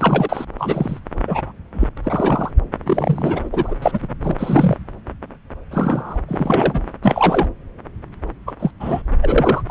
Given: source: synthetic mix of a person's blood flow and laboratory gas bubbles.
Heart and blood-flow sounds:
Doppler ultrasound of blood flow; subclavian vein
0.00-0.45 s: bubbles
0.58-0.99 s: bubbles
1.27-1.52 s: bubbles
1.74-1.88 s: bubbles
1.96-1.98 s: bubbles
2.04-2.51 s: bubbles
2.86-3.49 s: bubbles
3.52-3.75 s: bubbles
3.82-4.00 s: bubbles
4.02-4.08 s: bubbles
4.23-4.78 s: bubbles
5.71-6.19 s: bubbles
6.29-6.83 s: bubbles
7.03-7.47 s: bubbles
8.47-8.55 s: bubbles
8.59-8.71 s: bubbles
8.80-9.03 s: bubbles
9.22-9.62 s: bubbles
9.67-9.71 s: bubbles
From the record:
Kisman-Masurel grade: 233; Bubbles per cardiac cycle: several, 3 to 8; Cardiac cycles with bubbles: 50 to 99%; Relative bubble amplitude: loud (0.450 to 0.775); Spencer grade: 3 (all of the cardiac periods contain showers or single bubble signals, but not dominating or overriding the cardiac motion signals); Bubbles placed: anywhere in the cardiac cycle

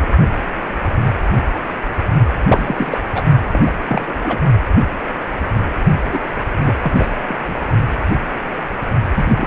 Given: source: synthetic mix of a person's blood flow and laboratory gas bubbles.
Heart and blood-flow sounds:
Doppler ultrasound of blood flow; precordium
0.00-0.08 s: bubbles
2.49-3.00 s: bubbles
3.14-3.21 s: bubbles
3.53-3.60 s: bubbles
3.66-3.74 s: bubbles
3.88-4.13 s: bubbles
4.25-4.39 s: bubbles
6.13-6.19 s: bubbles
6.62-6.76 s: bubbles
6.82-6.94 s: bubbles
6.96-7.07 s: bubbles
7.28-7.55 s: bubbles
9.14-9.47 s: bubbles
From the record:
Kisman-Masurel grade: 222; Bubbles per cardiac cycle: several, 3 to 8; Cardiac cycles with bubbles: 10 to 50%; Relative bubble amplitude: moderate (0.250 to 0.450); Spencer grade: 2 (many but less than half of the cardiac periods contain bubble signals, singularly or in groups); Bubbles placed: only in the low amplitude regions of the cardiac cycle

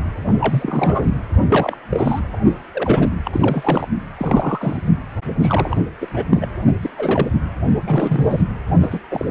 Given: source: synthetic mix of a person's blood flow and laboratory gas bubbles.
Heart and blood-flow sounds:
Doppler ultrasound of blood flow; precordium
0.27-0.32 s: bubbles
0.40-1.15 s: bubbles
1.49-1.77 s: bubbles
1.89-2.20 s: bubbles
2.33-2.38 s: bubbles
2.74-3.09 s: bubbles
3.25-3.89 s: bubbles
4.17-4.92 s: bubbles
5.40-5.84 s: bubbles
6.01-6.08 s: bubbles
6.13-6.48 s: bubbles
6.82-6.90 s: bubbles
6.98-7.28 s: bubbles
7.85-8.44 s: bubbles
8.81-9.00 s: bubbles
9.11-9.25 s: bubbles
From the record:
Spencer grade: 3 (all of the cardiac periods contain showers or single bubble signals, but not dominating or overriding the cardiac motion signals); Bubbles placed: anywhere in the cardiac cycle

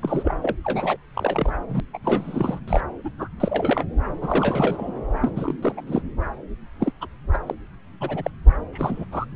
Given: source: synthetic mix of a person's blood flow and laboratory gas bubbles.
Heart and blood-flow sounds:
Doppler ultrasound of blood flow; subclavian vein
0.02-0.37 s: bubbles
0.41-0.56 s: bubbles
0.65-0.97 s: bubbles
1.14-1.56 s: bubbles
1.69-1.80 s: bubbles
1.93-1.99 s: bubbles
2.04-2.59 s: bubbles
2.67-2.81 s: bubbles
3.04-3.09 s: bubbles
3.18-3.28 s: bubbles
3.40-3.84 s: bubbles
4.21-4.94 s: bubbles
5.21-5.31 s: bubbles
5.35-5.56 s: bubbles
5.62-5.81 s: bubbles
5.87-6.02 s: bubbles
6.79-6.92 s: bubbles
7.01-7.07 s: bubbles
7.33-7.40 s: bubbles
7.46-7.55 s: bubbles
8.01-8.31 s: bubbles
8.72-9.05 s: bubbles
9.12-9.26 s: bubbles
From the record:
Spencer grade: 3 (all of the cardiac periods contain showers or single bubble signals, but not dominating or overriding the cardiac motion signals); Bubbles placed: anywhere in the cardiac cycle

